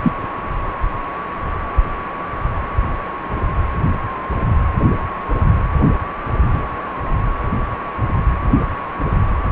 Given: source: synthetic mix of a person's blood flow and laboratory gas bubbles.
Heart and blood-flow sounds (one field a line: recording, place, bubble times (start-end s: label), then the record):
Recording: Doppler ultrasound of blood flow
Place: precordium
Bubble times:
0.03-0.12 s: bubbles
From the record:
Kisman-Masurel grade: 113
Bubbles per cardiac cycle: 1 to 2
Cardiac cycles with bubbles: 1 to 10%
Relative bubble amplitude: loud (0.450 to 0.775)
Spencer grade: 1 (occasional bubble signal discernible with the cardiac motion signal, with majority of cardiac periods free of bubbles)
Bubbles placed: anywhere in the cardiac cycle